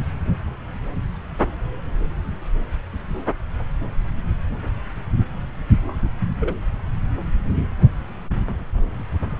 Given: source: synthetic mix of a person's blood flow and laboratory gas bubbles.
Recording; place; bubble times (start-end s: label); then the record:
Doppler ultrasound of blood flow; subclavian vein
5.88-5.96 s: bubbles
6.40-6.55 s: bubbles
From the record:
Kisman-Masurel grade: 121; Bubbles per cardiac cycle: 1 to 2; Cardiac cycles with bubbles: 10 to 50%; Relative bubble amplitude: barely perceptible (0.100 to 0.250); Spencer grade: 2 (many but less than half of the cardiac periods contain bubble signals, singularly or in groups); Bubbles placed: anywhere in the cardiac cycle